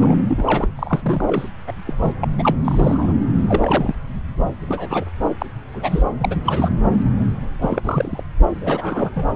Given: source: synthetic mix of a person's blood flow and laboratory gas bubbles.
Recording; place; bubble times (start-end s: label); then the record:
Doppler ultrasound of blood flow; subclavian vein
0.00-0.68 s: bubbles
0.75-1.48 s: bubbles
1.67-1.72 s: bubbles
1.86-1.95 s: bubbles
2.01-2.14 s: bubbles
2.20-2.28 s: bubbles
2.38-2.56 s: bubbles
2.65-3.13 s: bubbles
3.47-3.95 s: bubbles
4.68-5.04 s: bubbles
5.38-5.46 s: bubbles
5.72-6.03 s: bubbles
6.20-6.35 s: bubbles
6.46-6.69 s: bubbles
7.61-8.23 s: bubbles
8.61-9.31 s: bubbles
From the record:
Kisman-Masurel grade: 242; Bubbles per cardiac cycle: several, 3 to 8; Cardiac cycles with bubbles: 100%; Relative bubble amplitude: moderate (0.250 to 0.450); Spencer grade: 3 (all of the cardiac periods contain showers or single bubble signals, but not dominating or overriding the cardiac motion signals); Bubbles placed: anywhere in the cardiac cycle